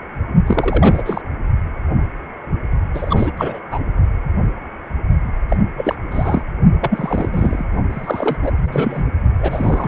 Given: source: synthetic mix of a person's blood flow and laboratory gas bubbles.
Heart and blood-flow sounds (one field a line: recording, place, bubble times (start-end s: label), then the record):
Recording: Doppler ultrasound of blood flow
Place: precordium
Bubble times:
0.46-1.02 s: bubbles
1.05-1.22 s: bubbles
2.94-3.32 s: bubbles
3.37-3.60 s: bubbles
3.71-3.79 s: bubbles
5.49-5.57 s: bubbles
5.77-5.95 s: bubbles
6.11-6.43 s: bubbles
6.81-7.64 s: bubbles
7.90-8.38 s: bubbles
8.43-8.52 s: bubbles
8.56-9.06 s: bubbles
9.38-9.88 s: bubbles
From the record:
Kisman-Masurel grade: 332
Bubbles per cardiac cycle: rolling drumbeat, 9 or more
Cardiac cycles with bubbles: 50 to 99%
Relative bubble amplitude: moderate (0.250 to 0.450)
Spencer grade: 3 (all of the cardiac periods contain showers or single bubble signals, but not dominating or overriding the cardiac motion signals)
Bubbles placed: only in the low amplitude regions of the cardiac cycle